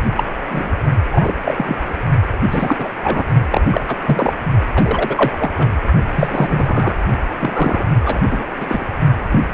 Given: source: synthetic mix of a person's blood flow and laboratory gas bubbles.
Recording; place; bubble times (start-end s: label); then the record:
Doppler ultrasound of blood flow; precordium
0.17-0.23 s: bubbles
0.50-0.71 s: bubbles
1.11-1.33 s: bubbles
1.44-1.96 s: bubbles
2.50-2.89 s: bubbles
3.04-3.23 s: bubbles
3.50-3.61 s: bubbles
3.70-3.81 s: bubbles
3.88-3.97 s: bubbles
4.07-4.33 s: bubbles
4.76-5.32 s: bubbles
5.39-5.51 s: bubbles
5.58-5.77 s: bubbles
6.16-6.95 s: bubbles
7.39-7.86 s: bubbles
8.04-8.45 s: bubbles
8.60-8.86 s: bubbles
9.31-9.40 s: bubbles
From the record:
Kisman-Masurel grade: 243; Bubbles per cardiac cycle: several, 3 to 8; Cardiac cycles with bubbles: 100%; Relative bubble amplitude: loud (0.450 to 0.775); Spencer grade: 3 (all of the cardiac periods contain showers or single bubble signals, but not dominating or overriding the cardiac motion signals); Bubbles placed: only in the low amplitude regions of the cardiac cycle